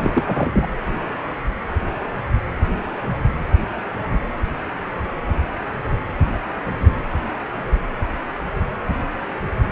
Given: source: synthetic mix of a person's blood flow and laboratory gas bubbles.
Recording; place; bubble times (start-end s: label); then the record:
Doppler ultrasound of blood flow; precordium
0.00-0.11 s: bubbles
0.14-0.24 s: bubbles
0.27-0.68 s: bubbles
From the record:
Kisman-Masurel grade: 213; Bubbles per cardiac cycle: several, 3 to 8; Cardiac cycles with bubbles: 1 to 10%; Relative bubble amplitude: loud (0.450 to 0.775); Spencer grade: 1 (occasional bubble signal discernible with the cardiac motion signal, with majority of cardiac periods free of bubbles); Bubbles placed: anywhere in the cardiac cycle